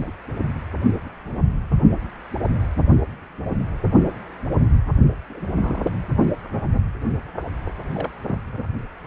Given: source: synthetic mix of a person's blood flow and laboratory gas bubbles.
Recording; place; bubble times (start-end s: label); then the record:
Doppler ultrasound of blood flow; precordium
0.00-0.13 s: bubbles
5.29-5.46 s: bubbles
5.61-5.96 s: bubbles
7.92-8.12 s: bubbles
8.26-8.40 s: bubbles
From the record:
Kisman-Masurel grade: 221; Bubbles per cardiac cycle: several, 3 to 8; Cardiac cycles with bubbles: 10 to 50%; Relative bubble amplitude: barely perceptible (0.100 to 0.250); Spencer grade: 2 (many but less than half of the cardiac periods contain bubble signals, singularly or in groups); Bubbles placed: only in the low amplitude regions of the cardiac cycle